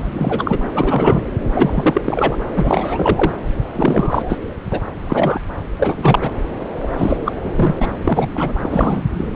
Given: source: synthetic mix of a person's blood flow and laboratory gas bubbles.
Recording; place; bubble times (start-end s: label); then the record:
Doppler ultrasound of blood flow; subclavian vein
0.00-0.58 s: bubbles
0.74-1.24 s: bubbles
1.54-2.01 s: bubbles
2.04-2.37 s: bubbles
2.52-3.32 s: bubbles
3.75-4.38 s: bubbles
4.71-4.80 s: bubbles
5.06-5.40 s: bubbles
5.79-6.19 s: bubbles
6.21-6.30 s: bubbles
6.82-6.88 s: bubbles
6.97-7.17 s: bubbles
7.25-7.33 s: bubbles
7.39-7.73 s: bubbles
7.79-7.87 s: bubbles
8.05-8.29 s: bubbles
8.34-8.52 s: bubbles
8.62-9.04 s: bubbles
9.14-9.28 s: bubbles
From the record:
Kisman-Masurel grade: 343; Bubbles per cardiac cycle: rolling drumbeat, 9 or more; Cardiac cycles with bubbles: 100%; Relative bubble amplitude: loud (0.450 to 0.775); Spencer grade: 3 (all of the cardiac periods contain showers or single bubble signals, but not dominating or overriding the cardiac motion signals); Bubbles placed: anywhere in the cardiac cycle